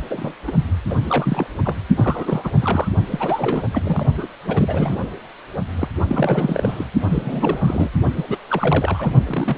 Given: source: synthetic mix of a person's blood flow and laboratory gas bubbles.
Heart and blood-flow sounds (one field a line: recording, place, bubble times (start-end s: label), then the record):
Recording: Doppler ultrasound of blood flow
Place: precordium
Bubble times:
0.10-0.34 s: bubbles
0.47-0.52 s: bubbles
0.89-0.96 s: bubbles
1.08-1.47 s: bubbles
1.65-1.81 s: bubbles
1.96-2.50 s: bubbles
2.61-2.88 s: bubbles
3.06-3.64 s: bubbles
3.72-4.06 s: bubbles
4.16-4.27 s: bubbles
4.46-5.10 s: bubbles
5.75-5.88 s: bubbles
6.06-6.84 s: bubbles
7.00-7.89 s: bubbles
8.17-8.24 s: bubbles
8.29-8.38 s: bubbles
8.48-9.11 s: bubbles
9.24-9.57 s: bubbles
From the record:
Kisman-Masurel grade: 342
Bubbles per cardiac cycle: rolling drumbeat, 9 or more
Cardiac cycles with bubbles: 100%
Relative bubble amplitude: moderate (0.250 to 0.450)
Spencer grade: 3 (all of the cardiac periods contain showers or single bubble signals, but not dominating or overriding the cardiac motion signals)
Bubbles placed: only in the low amplitude regions of the cardiac cycle